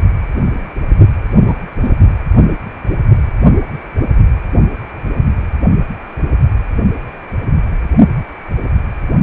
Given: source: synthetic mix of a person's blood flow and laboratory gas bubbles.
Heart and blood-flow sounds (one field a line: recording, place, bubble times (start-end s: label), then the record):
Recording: Doppler ultrasound of blood flow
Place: precordium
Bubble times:
1.46-1.58 s: bubbles
1.82-1.95 s: bubbles
From the record:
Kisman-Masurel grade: 112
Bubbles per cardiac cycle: 1 to 2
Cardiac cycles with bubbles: 1 to 10%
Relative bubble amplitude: moderate (0.250 to 0.450)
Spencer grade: 1 (occasional bubble signal discernible with the cardiac motion signal, with majority of cardiac periods free of bubbles)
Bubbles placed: only in the low amplitude regions of the cardiac cycle